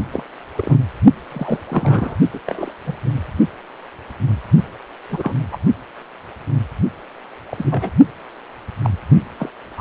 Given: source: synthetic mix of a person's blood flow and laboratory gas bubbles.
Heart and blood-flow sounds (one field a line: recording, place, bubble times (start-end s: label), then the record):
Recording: Doppler ultrasound of blood flow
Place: precordium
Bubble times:
0.12-0.23 s: bubbles
0.55-0.77 s: bubbles
1.28-1.59 s: bubbles
1.69-2.18 s: bubbles
2.33-2.40 s: bubbles
2.47-2.74 s: bubbles
2.86-2.95 s: bubbles
3.05-3.14 s: bubbles
5.10-5.34 s: bubbles
5.52-5.57 s: bubbles
7.50-7.91 s: bubbles
8.82-8.90 s: bubbles
9.38-9.49 s: bubbles
9.77-9.81 s: bubbles
From the record:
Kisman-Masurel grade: 232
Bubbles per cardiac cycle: several, 3 to 8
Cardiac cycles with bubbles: 50 to 99%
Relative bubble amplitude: moderate (0.250 to 0.450)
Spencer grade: 3 (all of the cardiac periods contain showers or single bubble signals, but not dominating or overriding the cardiac motion signals)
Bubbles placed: only in the low amplitude regions of the cardiac cycle